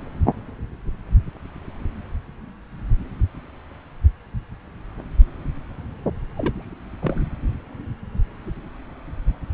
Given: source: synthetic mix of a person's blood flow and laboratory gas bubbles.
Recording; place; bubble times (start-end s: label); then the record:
Doppler ultrasound of blood flow; subclavian vein
6.37-6.66 s: bubbles
7.01-7.25 s: bubbles
From the record:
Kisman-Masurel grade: 211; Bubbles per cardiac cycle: several, 3 to 8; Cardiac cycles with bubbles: 1 to 10%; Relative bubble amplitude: barely perceptible (0.100 to 0.250); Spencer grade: 1 (occasional bubble signal discernible with the cardiac motion signal, with majority of cardiac periods free of bubbles); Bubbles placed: anywhere in the cardiac cycle